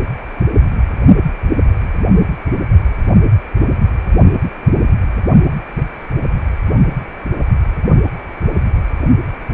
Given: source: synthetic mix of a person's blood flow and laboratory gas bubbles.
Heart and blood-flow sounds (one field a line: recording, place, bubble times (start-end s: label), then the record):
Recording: Doppler ultrasound of blood flow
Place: precordium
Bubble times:
9.48-9.54 s: bubbles
From the record:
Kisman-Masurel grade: 113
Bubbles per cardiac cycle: 1 to 2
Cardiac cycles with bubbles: 1 to 10%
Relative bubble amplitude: loud (0.450 to 0.775)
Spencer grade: 1 (occasional bubble signal discernible with the cardiac motion signal, with majority of cardiac periods free of bubbles)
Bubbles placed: only in the low amplitude regions of the cardiac cycle